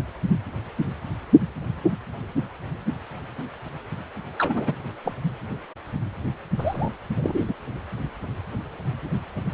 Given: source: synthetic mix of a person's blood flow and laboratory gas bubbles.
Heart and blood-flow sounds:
Doppler ultrasound of blood flow; precordium
4.38-4.75 s: bubbles
5.04-5.13 s: bubbles
6.58-6.89 s: bubbles
7.15-7.44 s: bubbles
7.47-7.54 s: bubbles
From the record:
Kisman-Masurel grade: 222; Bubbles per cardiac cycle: several, 3 to 8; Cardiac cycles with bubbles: 10 to 50%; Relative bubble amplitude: moderate (0.250 to 0.450); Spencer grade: 2 (many but less than half of the cardiac periods contain bubble signals, singularly or in groups); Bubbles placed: only in the low amplitude regions of the cardiac cycle

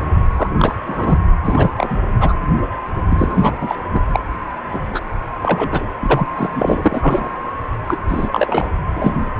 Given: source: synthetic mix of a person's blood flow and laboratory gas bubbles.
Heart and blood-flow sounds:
Doppler ultrasound of blood flow; precordium
0.35-0.49 s: bubbles
0.57-0.75 s: bubbles
0.86-1.18 s: bubbles
1.44-1.70 s: bubbles
1.77-1.97 s: bubbles
2.20-2.37 s: bubbles
3.10-3.53 s: bubbles
3.60-3.76 s: bubbles
3.93-4.01 s: bubbles
4.12-4.19 s: bubbles
4.66-5.00 s: bubbles
5.42-5.88 s: bubbles
6.01-6.26 s: bubbles
6.35-6.47 s: bubbles
6.55-7.31 s: bubbles
7.86-7.96 s: bubbles
8.07-8.71 s: bubbles
8.95-9.13 s: bubbles
From the record:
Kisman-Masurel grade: 233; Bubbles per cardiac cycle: several, 3 to 8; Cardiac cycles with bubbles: 50 to 99%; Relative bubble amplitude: loud (0.450 to 0.775); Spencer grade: 3 (all of the cardiac periods contain showers or single bubble signals, but not dominating or overriding the cardiac motion signals); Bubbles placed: anywhere in the cardiac cycle

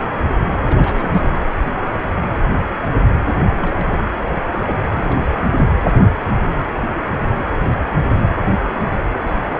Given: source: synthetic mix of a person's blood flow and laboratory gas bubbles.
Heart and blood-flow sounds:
Doppler ultrasound of blood flow; precordium
0.65-1.47 s: bubbles
3.55-4.00 s: bubbles
4.53-5.22 s: bubbles
5.26-5.40 s: bubbles
From the record:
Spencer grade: 2 (many but less than half of the cardiac periods contain bubble signals, singularly or in groups); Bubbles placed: anywhere in the cardiac cycle

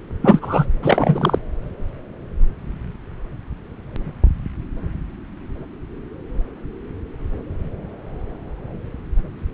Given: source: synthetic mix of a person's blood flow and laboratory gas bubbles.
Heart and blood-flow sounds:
Doppler ultrasound of blood flow; subclavian vein
0.21-0.67 s: bubbles
0.82-1.38 s: bubbles
From the record:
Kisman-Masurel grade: 213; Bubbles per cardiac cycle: several, 3 to 8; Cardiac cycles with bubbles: 1 to 10%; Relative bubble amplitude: loud (0.450 to 0.775); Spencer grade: 1 (occasional bubble signal discernible with the cardiac motion signal, with majority of cardiac periods free of bubbles); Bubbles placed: anywhere in the cardiac cycle

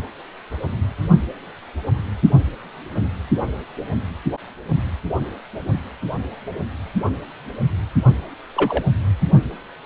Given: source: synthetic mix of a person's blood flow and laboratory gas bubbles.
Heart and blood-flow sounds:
Doppler ultrasound of blood flow; precordium
8.56-8.82 s: bubbles
From the record:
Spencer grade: 1 (occasional bubble signal discernible with the cardiac motion signal, with majority of cardiac periods free of bubbles); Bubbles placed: only in the low amplitude regions of the cardiac cycle

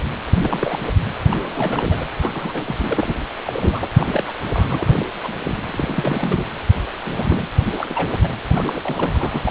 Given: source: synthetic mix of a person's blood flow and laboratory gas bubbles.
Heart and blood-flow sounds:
Doppler ultrasound of blood flow; precordium
0.35-0.79 s: bubbles
1.30-2.06 s: bubbles
2.15-3.15 s: bubbles
3.45-3.90 s: bubbles
3.94-4.24 s: bubbles
4.27-4.32 s: bubbles
4.52-5.06 s: bubbles
5.23-5.33 s: bubbles
5.40-5.60 s: bubbles
5.67-6.47 s: bubbles
7.05-7.47 s: bubbles
7.73-7.87 s: bubbles
7.89-8.09 s: bubbles
8.22-8.30 s: bubbles
8.54-9.51 s: bubbles
From the record:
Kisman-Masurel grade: 342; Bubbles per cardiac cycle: rolling drumbeat, 9 or more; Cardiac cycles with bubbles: 100%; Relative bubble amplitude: moderate (0.250 to 0.450); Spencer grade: 3 (all of the cardiac periods contain showers or single bubble signals, but not dominating or overriding the cardiac motion signals); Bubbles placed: anywhere in the cardiac cycle

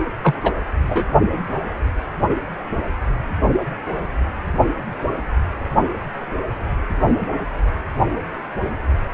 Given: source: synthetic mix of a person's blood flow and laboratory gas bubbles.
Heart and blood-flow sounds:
Doppler ultrasound of blood flow; precordium
0.23-0.34 s: bubbles
0.43-0.51 s: bubbles
0.89-1.03 s: bubbles
From the record:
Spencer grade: 1 (occasional bubble signal discernible with the cardiac motion signal, with majority of cardiac periods free of bubbles); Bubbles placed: only in the low amplitude regions of the cardiac cycle

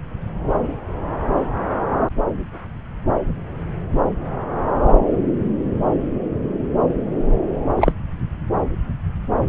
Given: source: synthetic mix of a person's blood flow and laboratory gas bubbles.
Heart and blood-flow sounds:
Doppler ultrasound of blood flow; subclavian vein
7.76-7.92 s: bubbles
From the record:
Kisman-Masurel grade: 113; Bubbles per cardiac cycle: 1 to 2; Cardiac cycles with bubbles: 1 to 10%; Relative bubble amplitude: loud (0.450 to 0.775); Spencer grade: 1 (occasional bubble signal discernible with the cardiac motion signal, with majority of cardiac periods free of bubbles); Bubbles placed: anywhere in the cardiac cycle

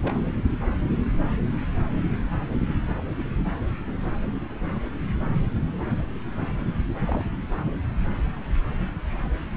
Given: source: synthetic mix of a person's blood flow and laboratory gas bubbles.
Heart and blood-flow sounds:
Doppler ultrasound of blood flow; subclavian vein
0.04-0.14 s: bubbles
7.07-7.25 s: bubbles
From the record:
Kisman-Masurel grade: 121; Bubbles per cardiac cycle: 1 to 2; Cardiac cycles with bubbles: 10 to 50%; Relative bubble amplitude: barely perceptible (0.100 to 0.250); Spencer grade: 2 (many but less than half of the cardiac periods contain bubble signals, singularly or in groups); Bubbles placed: anywhere in the cardiac cycle

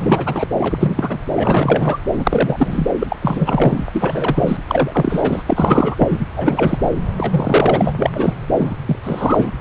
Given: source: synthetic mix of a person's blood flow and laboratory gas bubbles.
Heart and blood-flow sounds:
Doppler ultrasound of blood flow; subclavian vein
0.00-0.47 s: bubbles
0.59-1.19 s: bubbles
1.35-1.98 s: bubbles
2.16-2.88 s: bubbles
3.00-3.16 s: bubbles
3.22-3.83 s: bubbles
3.92-4.57 s: bubbles
4.67-5.42 s: bubbles
5.46-5.96 s: bubbles
5.99-6.25 s: bubbles
6.37-6.78 s: bubbles
6.82-6.90 s: bubbles
7.17-7.93 s: bubbles
7.97-8.10 s: bubbles
8.13-8.36 s: bubbles
8.54-8.74 s: bubbles
8.85-8.96 s: bubbles
9.03-9.52 s: bubbles
From the record:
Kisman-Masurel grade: 343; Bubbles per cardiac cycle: rolling drumbeat, 9 or more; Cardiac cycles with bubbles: 100%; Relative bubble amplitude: loud (0.450 to 0.775); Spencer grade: 3 (all of the cardiac periods contain showers or single bubble signals, but not dominating or overriding the cardiac motion signals); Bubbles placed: anywhere in the cardiac cycle

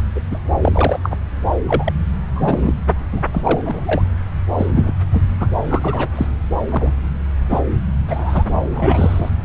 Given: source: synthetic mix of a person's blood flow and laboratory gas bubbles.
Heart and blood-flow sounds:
Doppler ultrasound of blood flow; subclavian vein
0.00-0.03 s: bubbles
0.14-0.20 s: bubbles
0.30-0.39 s: bubbles
0.62-0.99 s: bubbles
1.03-1.17 s: bubbles
1.65-1.92 s: bubbles
2.34-2.74 s: bubbles
3.11-3.23 s: bubbles
3.32-3.61 s: bubbles
3.65-4.03 s: bubbles
4.58-4.72 s: bubbles
4.75-4.92 s: bubbles
5.12-5.25 s: bubbles
5.40-5.47 s: bubbles
5.68-6.08 s: bubbles
6.15-6.27 s: bubbles
6.71-6.92 s: bubbles
7.50-7.58 s: bubbles
8.08-8.43 s: bubbles
8.74-9.30 s: bubbles
From the record:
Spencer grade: 3 (all of the cardiac periods contain showers or single bubble signals, but not dominating or overriding the cardiac motion signals); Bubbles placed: anywhere in the cardiac cycle

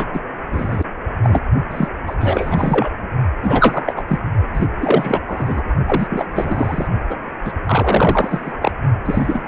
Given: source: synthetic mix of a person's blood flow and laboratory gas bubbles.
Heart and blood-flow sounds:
Doppler ultrasound of blood flow; precordium
0.00-0.10 s: bubbles
0.14-0.20 s: bubbles
0.52-0.86 s: bubbles
1.23-1.44 s: bubbles
1.71-1.88 s: bubbles
2.07-2.14 s: bubbles
2.20-2.91 s: bubbles
3.43-3.93 s: bubbles
3.96-4.04 s: bubbles
4.07-4.19 s: bubbles
4.53-4.67 s: bubbles
4.79-5.20 s: bubbles
5.27-5.62 s: bubbles
5.86-6.06 s: bubbles
6.09-6.25 s: bubbles
6.31-6.87 s: bubbles
7.09-7.16 s: bubbles
7.44-7.52 s: bubbles
7.65-8.53 s: bubbles
8.62-8.71 s: bubbles
9.05-9.42 s: bubbles
From the record:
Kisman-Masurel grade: 343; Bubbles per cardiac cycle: rolling drumbeat, 9 or more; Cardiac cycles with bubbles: 100%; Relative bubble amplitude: loud (0.450 to 0.775); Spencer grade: 3 (all of the cardiac periods contain showers or single bubble signals, but not dominating or overriding the cardiac motion signals); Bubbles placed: only in the low amplitude regions of the cardiac cycle

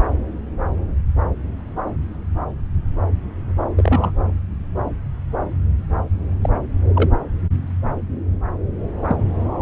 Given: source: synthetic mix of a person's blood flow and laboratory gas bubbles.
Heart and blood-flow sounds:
Doppler ultrasound of blood flow; subclavian vein
3.77-4.12 s: bubbles
6.42-6.50 s: bubbles
6.94-7.09 s: bubbles
9.05-9.17 s: bubbles
From the record:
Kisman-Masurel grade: 122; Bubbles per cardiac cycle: 1 to 2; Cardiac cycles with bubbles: 10 to 50%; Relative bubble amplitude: moderate (0.250 to 0.450); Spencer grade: 2 (many but less than half of the cardiac periods contain bubble signals, singularly or in groups); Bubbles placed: anywhere in the cardiac cycle

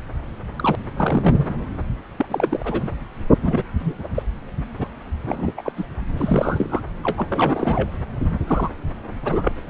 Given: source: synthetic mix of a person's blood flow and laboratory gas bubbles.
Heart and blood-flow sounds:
Doppler ultrasound of blood flow; subclavian vein
0.56-0.76 s: bubbles
0.96-1.48 s: bubbles
2.17-2.89 s: bubbles
3.42-3.63 s: bubbles
3.79-3.94 s: bubbles
4.15-4.23 s: bubbles
4.79-4.88 s: bubbles
5.25-5.54 s: bubbles
5.57-5.62 s: bubbles
5.65-5.73 s: bubbles
5.77-5.85 s: bubbles
6.17-6.81 s: bubbles
7.03-7.89 s: bubbles
8.47-8.71 s: bubbles
9.21-9.52 s: bubbles
From the record:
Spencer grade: 3 (all of the cardiac periods contain showers or single bubble signals, but not dominating or overriding the cardiac motion signals); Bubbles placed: anywhere in the cardiac cycle

